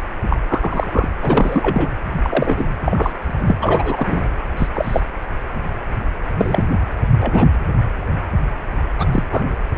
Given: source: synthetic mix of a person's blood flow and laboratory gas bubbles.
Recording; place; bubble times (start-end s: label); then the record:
Doppler ultrasound of blood flow; precordium
0.30-0.36 s: bubbles
0.47-1.09 s: bubbles
1.22-1.90 s: bubbles
2.22-2.65 s: bubbles
2.85-3.12 s: bubbles
3.24-3.58 s: bubbles
3.61-4.22 s: bubbles
4.57-4.67 s: bubbles
4.73-5.01 s: bubbles
6.38-6.62 s: bubbles
7.20-7.48 s: bubbles
8.97-9.05 s: bubbles
9.12-9.23 s: bubbles
9.31-9.43 s: bubbles
From the record:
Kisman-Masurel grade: 233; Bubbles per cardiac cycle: several, 3 to 8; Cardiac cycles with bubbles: 50 to 99%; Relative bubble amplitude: loud (0.450 to 0.775); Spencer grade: 3 (all of the cardiac periods contain showers or single bubble signals, but not dominating or overriding the cardiac motion signals); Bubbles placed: anywhere in the cardiac cycle